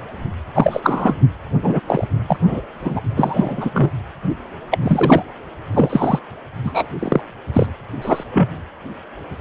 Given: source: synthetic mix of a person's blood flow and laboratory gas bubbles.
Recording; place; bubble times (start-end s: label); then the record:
Doppler ultrasound of blood flow; precordium
0.54-1.15 s: bubbles
1.62-1.80 s: bubbles
1.87-2.06 s: bubbles
2.28-2.38 s: bubbles
2.46-2.62 s: bubbles
2.81-3.02 s: bubbles
3.16-3.91 s: bubbles
4.71-4.79 s: bubbles
4.82-5.23 s: bubbles
5.71-6.19 s: bubbles
6.64-7.21 s: bubbles
7.53-7.67 s: bubbles
8.01-8.23 s: bubbles
8.32-8.48 s: bubbles
From the record:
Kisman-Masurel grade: 233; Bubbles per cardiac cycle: several, 3 to 8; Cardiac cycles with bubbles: 50 to 99%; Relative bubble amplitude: loud (0.450 to 0.775); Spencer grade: 3 (all of the cardiac periods contain showers or single bubble signals, but not dominating or overriding the cardiac motion signals); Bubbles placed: anywhere in the cardiac cycle